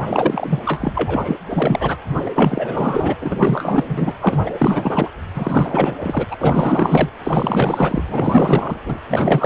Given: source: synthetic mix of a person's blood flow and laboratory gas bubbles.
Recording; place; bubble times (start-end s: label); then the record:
Doppler ultrasound of blood flow; precordium
0.07-0.59 s: bubbles
0.65-1.36 s: bubbles
1.49-1.97 s: bubbles
2.07-2.21 s: bubbles
2.25-2.30 s: bubbles
2.34-3.15 s: bubbles
3.20-3.84 s: bubbles
3.88-4.13 s: bubbles
4.21-4.54 s: bubbles
4.58-5.09 s: bubbles
5.34-5.96 s: bubbles
6.01-6.26 s: bubbles
6.30-6.36 s: bubbles
6.41-7.09 s: bubbles
7.24-8.04 s: bubbles
8.08-8.80 s: bubbles
8.85-8.99 s: bubbles
9.10-9.46 s: bubbles
From the record:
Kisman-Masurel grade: 444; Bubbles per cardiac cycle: continuous sound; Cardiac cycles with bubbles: 100%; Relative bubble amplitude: maximal (0.775 to 0.999); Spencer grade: 4 (maximum detectable bubble signal sounding continuously throughout systole and diastole of every cardiac period, and overriding the amplitude of the normal cardiac signals); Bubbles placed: anywhere in the cardiac cycle